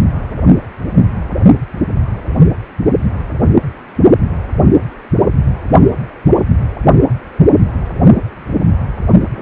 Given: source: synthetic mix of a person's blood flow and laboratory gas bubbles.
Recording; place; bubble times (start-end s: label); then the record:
Doppler ultrasound of blood flow; precordium
9.35-9.42 s: bubbles
From the record:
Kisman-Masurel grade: 111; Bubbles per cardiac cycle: 1 to 2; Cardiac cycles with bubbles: 1 to 10%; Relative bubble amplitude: barely perceptible (0.100 to 0.250); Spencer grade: 1 (occasional bubble signal discernible with the cardiac motion signal, with majority of cardiac periods free of bubbles); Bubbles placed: only in the low amplitude regions of the cardiac cycle